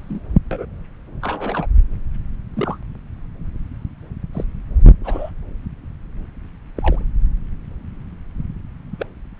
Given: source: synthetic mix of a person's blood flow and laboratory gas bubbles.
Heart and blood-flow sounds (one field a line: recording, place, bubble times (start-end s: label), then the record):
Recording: Doppler ultrasound of blood flow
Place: subclavian vein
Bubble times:
0.00-0.39 s: bubbles
0.51-0.65 s: bubbles
1.22-1.67 s: bubbles
2.53-2.77 s: bubbles
4.33-4.44 s: bubbles
5.04-5.31 s: bubbles
6.76-7.03 s: bubbles
8.93-9.05 s: bubbles
From the record:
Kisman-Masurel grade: 121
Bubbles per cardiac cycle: 1 to 2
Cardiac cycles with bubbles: 10 to 50%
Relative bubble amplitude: barely perceptible (0.100 to 0.250)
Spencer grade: 2 (many but less than half of the cardiac periods contain bubble signals, singularly or in groups)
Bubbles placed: anywhere in the cardiac cycle